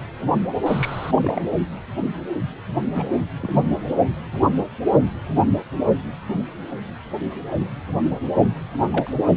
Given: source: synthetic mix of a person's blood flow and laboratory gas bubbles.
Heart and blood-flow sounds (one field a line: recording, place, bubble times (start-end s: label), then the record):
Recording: Doppler ultrasound of blood flow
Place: precordium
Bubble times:
0.66-1.11 s: bubbles
1.14-1.42 s: bubbles
2.94-3.09 s: bubbles
3.42-3.65 s: bubbles
7.59-7.67 s: bubbles
8.42-8.56 s: bubbles
8.90-9.11 s: bubbles
From the record:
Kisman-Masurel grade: 122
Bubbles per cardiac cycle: 1 to 2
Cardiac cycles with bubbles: 10 to 50%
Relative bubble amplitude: moderate (0.250 to 0.450)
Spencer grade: 2 (many but less than half of the cardiac periods contain bubble signals, singularly or in groups)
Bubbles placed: anywhere in the cardiac cycle